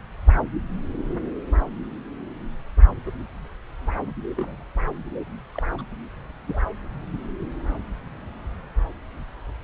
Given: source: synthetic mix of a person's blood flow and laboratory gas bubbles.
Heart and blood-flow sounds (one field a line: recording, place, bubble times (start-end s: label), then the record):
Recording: Doppler ultrasound of blood flow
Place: subclavian vein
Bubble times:
3.06-3.10 s: bubbles
4.36-4.63 s: bubbles
5.54-5.62 s: bubbles
5.77-5.82 s: bubbles
6.46-6.59 s: bubbles
From the record:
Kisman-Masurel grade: 121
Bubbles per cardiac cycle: 1 to 2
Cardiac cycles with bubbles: 10 to 50%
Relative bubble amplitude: barely perceptible (0.100 to 0.250)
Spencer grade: 2 (many but less than half of the cardiac periods contain bubble signals, singularly or in groups)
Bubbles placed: anywhere in the cardiac cycle